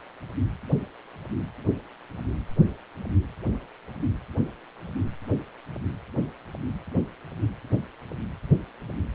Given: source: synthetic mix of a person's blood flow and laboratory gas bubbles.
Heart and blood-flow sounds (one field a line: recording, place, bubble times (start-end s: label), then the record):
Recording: Doppler ultrasound of blood flow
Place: precordium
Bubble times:
no bubbles
From the record:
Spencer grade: 0 (complete lack of bubble signals)